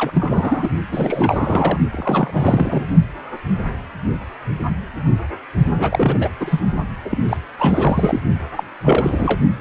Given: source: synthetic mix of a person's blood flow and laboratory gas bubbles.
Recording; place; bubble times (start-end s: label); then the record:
Doppler ultrasound of blood flow; precordium
0.00-0.11 s: bubbles
0.14-0.69 s: bubbles
0.91-1.78 s: bubbles
1.91-2.83 s: bubbles
5.78-6.17 s: bubbles
6.20-6.29 s: bubbles
6.40-6.61 s: bubbles
7.04-7.24 s: bubbles
7.27-7.37 s: bubbles
7.58-8.20 s: bubbles
8.57-8.64 s: bubbles
8.83-9.40 s: bubbles
9.58-9.61 s: bubbles
From the record:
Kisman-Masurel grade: 332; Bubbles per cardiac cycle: rolling drumbeat, 9 or more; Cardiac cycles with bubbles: 50 to 99%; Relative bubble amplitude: moderate (0.250 to 0.450); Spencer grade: 3 (all of the cardiac periods contain showers or single bubble signals, but not dominating or overriding the cardiac motion signals); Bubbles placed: only in the low amplitude regions of the cardiac cycle